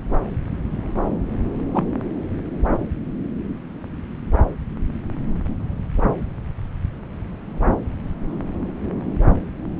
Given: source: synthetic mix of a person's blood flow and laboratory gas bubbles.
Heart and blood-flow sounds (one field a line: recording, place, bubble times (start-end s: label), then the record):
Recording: Doppler ultrasound of blood flow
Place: subclavian vein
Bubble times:
1.72-1.85 s: bubbles
From the record:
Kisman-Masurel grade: 113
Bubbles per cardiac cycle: 1 to 2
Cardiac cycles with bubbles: 1 to 10%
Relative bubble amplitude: loud (0.450 to 0.775)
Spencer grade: 1 (occasional bubble signal discernible with the cardiac motion signal, with majority of cardiac periods free of bubbles)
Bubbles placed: anywhere in the cardiac cycle